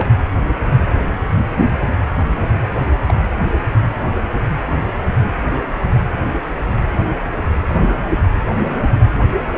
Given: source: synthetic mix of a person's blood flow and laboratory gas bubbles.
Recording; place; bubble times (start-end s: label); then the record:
Doppler ultrasound of blood flow; precordium
0.00-0.07 s: bubbles
3.07-3.15 s: bubbles
7.67-7.77 s: bubbles
From the record:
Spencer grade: 2 (many but less than half of the cardiac periods contain bubble signals, singularly or in groups); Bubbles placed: anywhere in the cardiac cycle